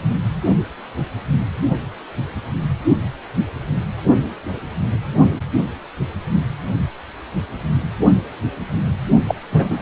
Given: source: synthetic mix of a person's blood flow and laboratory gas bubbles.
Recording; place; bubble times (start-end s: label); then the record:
Doppler ultrasound of blood flow; precordium
9.28-9.35 s: bubbles
9.52-9.82 s: bubbles
From the record:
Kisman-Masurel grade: 213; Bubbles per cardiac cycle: several, 3 to 8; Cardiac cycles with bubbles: 1 to 10%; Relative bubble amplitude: loud (0.450 to 0.775); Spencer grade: 1 (occasional bubble signal discernible with the cardiac motion signal, with majority of cardiac periods free of bubbles); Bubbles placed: only in the low amplitude regions of the cardiac cycle